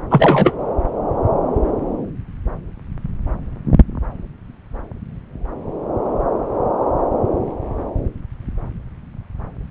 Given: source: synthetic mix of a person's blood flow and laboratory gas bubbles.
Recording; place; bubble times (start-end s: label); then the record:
Doppler ultrasound of blood flow; subclavian vein
0.10-0.55 s: bubbles
From the record:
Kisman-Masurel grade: 213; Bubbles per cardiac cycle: several, 3 to 8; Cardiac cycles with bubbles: 1 to 10%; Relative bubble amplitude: loud (0.450 to 0.775); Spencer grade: 1 (occasional bubble signal discernible with the cardiac motion signal, with majority of cardiac periods free of bubbles); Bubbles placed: anywhere in the cardiac cycle